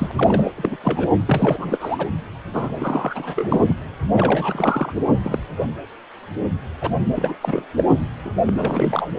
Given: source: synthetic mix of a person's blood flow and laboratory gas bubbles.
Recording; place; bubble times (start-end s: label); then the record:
Doppler ultrasound of blood flow; precordium
0.00-0.12 s: bubbles
0.16-0.51 s: bubbles
0.56-0.77 s: bubbles
0.83-1.10 s: bubbles
1.29-2.09 s: bubbles
2.53-3.74 s: bubbles
4.12-4.93 s: bubbles
5.23-5.39 s: bubbles
6.81-6.91 s: bubbles
7.16-7.35 s: bubbles
7.41-7.65 s: bubbles
7.77-7.86 s: bubbles
8.25-8.31 s: bubbles
8.46-9.11 s: bubbles
From the record:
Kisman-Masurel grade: 332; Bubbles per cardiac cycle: rolling drumbeat, 9 or more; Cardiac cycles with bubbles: 50 to 99%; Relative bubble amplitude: moderate (0.250 to 0.450); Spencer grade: 3 (all of the cardiac periods contain showers or single bubble signals, but not dominating or overriding the cardiac motion signals); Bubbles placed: anywhere in the cardiac cycle